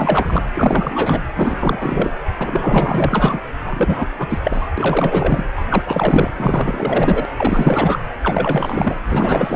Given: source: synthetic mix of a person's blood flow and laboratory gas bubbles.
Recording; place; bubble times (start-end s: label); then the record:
Doppler ultrasound of blood flow; precordium
0.00-0.43 s: bubbles
0.54-1.22 s: bubbles
1.34-2.11 s: bubbles
2.36-3.40 s: bubbles
3.65-4.08 s: bubbles
4.18-4.39 s: bubbles
4.44-4.68 s: bubbles
4.78-5.45 s: bubbles
5.55-5.66 s: bubbles
5.70-5.83 s: bubbles
5.86-6.30 s: bubbles
6.37-7.25 s: bubbles
7.37-7.99 s: bubbles
8.22-9.02 s: bubbles
9.08-9.56 s: bubbles
From the record:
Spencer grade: 4 (maximum detectable bubble signal sounding continuously throughout systole and diastole of every cardiac period, and overriding the amplitude of the normal cardiac signals); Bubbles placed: anywhere in the cardiac cycle